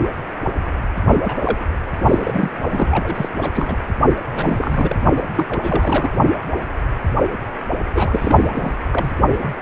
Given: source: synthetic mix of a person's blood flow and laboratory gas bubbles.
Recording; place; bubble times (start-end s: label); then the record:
Doppler ultrasound of blood flow; precordium
1.22-1.63 s: bubbles
2.02-2.50 s: bubbles
2.69-3.29 s: bubbles
3.42-3.77 s: bubbles
4.33-4.98 s: bubbles
5.16-5.24 s: bubbles
5.35-5.45 s: bubbles
5.49-6.09 s: bubbles
7.95-8.50 s: bubbles
8.54-8.73 s: bubbles
8.92-9.11 s: bubbles
9.30-9.49 s: bubbles
9.57-9.62 s: bubbles
From the record:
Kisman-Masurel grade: 332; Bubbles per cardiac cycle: rolling drumbeat, 9 or more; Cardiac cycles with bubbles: 50 to 99%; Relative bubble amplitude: moderate (0.250 to 0.450); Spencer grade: 3 (all of the cardiac periods contain showers or single bubble signals, but not dominating or overriding the cardiac motion signals); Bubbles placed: only in the low amplitude regions of the cardiac cycle